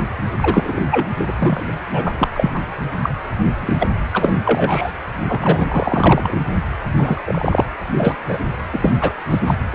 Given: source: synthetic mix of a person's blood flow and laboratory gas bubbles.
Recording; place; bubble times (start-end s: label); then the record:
Doppler ultrasound of blood flow; precordium
0.00-0.05 s: bubbles
0.38-0.80 s: bubbles
0.91-1.06 s: bubbles
1.19-1.66 s: bubbles
1.93-2.27 s: bubbles
2.33-2.51 s: bubbles
2.54-2.60 s: bubbles
3.02-3.10 s: bubbles
3.61-3.88 s: bubbles
4.12-4.35 s: bubbles
4.44-4.93 s: bubbles
5.28-6.42 s: bubbles
6.97-7.65 s: bubbles
7.92-8.15 s: bubbles
8.28-8.38 s: bubbles
8.72-8.93 s: bubbles
9.00-9.12 s: bubbles
9.29-9.40 s: bubbles
9.46-9.54 s: bubbles
9.72-9.75 s: bubbles
From the record:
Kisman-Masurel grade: 243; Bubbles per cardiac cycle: several, 3 to 8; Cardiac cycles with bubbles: 100%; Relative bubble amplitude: loud (0.450 to 0.775); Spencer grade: 3 (all of the cardiac periods contain showers or single bubble signals, but not dominating or overriding the cardiac motion signals); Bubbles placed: anywhere in the cardiac cycle